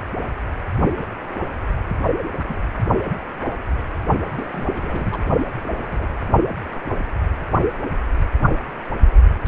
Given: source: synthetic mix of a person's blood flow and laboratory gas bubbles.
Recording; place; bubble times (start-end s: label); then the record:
Doppler ultrasound of blood flow; precordium
0.76-1.05 s: bubbles
1.27-1.37 s: bubbles
2.33-2.56 s: bubbles
4.34-4.47 s: bubbles
4.50-4.66 s: bubbles
4.71-5.20 s: bubbles
5.47-5.52 s: bubbles
5.63-6.16 s: bubbles
6.19-6.21 s: bubbles
From the record:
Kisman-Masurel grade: 221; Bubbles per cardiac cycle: several, 3 to 8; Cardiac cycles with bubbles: 10 to 50%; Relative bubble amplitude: barely perceptible (0.100 to 0.250); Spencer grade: 2 (many but less than half of the cardiac periods contain bubble signals, singularly or in groups); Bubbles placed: only in the low amplitude regions of the cardiac cycle